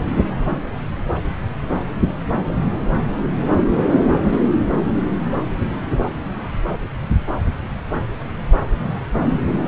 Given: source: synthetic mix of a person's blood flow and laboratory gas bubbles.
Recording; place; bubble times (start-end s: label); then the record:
Doppler ultrasound of blood flow; subclavian vein
4.31-4.39 s: bubbles
From the record:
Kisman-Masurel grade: 113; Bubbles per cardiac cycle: 1 to 2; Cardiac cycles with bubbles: 1 to 10%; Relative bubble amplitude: loud (0.450 to 0.775); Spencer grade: 1 (occasional bubble signal discernible with the cardiac motion signal, with majority of cardiac periods free of bubbles); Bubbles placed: anywhere in the cardiac cycle